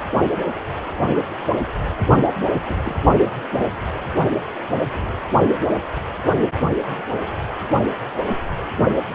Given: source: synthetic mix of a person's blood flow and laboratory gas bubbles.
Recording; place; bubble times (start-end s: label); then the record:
Doppler ultrasound of blood flow; precordium
2.69-2.79 s: bubbles
2.83-2.96 s: bubbles
From the record:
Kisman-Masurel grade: 112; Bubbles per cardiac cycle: 1 to 2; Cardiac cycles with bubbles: 1 to 10%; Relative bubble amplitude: moderate (0.250 to 0.450); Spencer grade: 1 (occasional bubble signal discernible with the cardiac motion signal, with majority of cardiac periods free of bubbles); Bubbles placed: only in the low amplitude regions of the cardiac cycle